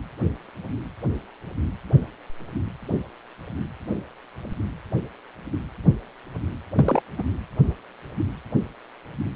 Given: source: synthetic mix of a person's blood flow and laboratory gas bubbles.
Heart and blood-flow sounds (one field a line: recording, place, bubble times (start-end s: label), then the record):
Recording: Doppler ultrasound of blood flow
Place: precordium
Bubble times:
6.75-7.01 s: bubbles
7.18-7.24 s: bubbles
From the record:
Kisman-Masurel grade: 112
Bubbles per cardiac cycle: 1 to 2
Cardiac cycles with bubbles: 1 to 10%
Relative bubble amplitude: moderate (0.250 to 0.450)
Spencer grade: 1 (occasional bubble signal discernible with the cardiac motion signal, with majority of cardiac periods free of bubbles)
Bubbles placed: anywhere in the cardiac cycle